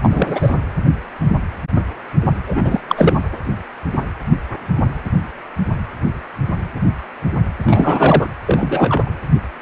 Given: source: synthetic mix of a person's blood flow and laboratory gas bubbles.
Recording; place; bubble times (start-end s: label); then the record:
Doppler ultrasound of blood flow; precordium
0.02-0.55 s: bubbles
2.46-2.80 s: bubbles
2.89-3.14 s: bubbles
7.63-8.29 s: bubbles
8.46-9.10 s: bubbles
From the record:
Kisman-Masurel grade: 223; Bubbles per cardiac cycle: several, 3 to 8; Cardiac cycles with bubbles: 10 to 50%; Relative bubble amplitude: loud (0.450 to 0.775); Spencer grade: 2 (many but less than half of the cardiac periods contain bubble signals, singularly or in groups); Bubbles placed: anywhere in the cardiac cycle